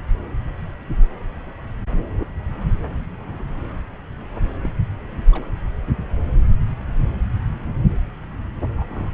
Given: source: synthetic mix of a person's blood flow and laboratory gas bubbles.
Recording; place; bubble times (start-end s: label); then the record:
Doppler ultrasound of blood flow; subclavian vein
4.62-4.70 s: bubbles
5.32-5.46 s: bubbles
8.76-8.87 s: bubbles
8.90-9.11 s: bubbles
From the record:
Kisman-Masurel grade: 121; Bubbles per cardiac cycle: 1 to 2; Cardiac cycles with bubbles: 10 to 50%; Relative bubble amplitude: barely perceptible (0.100 to 0.250); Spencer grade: 2 (many but less than half of the cardiac periods contain bubble signals, singularly or in groups); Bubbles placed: anywhere in the cardiac cycle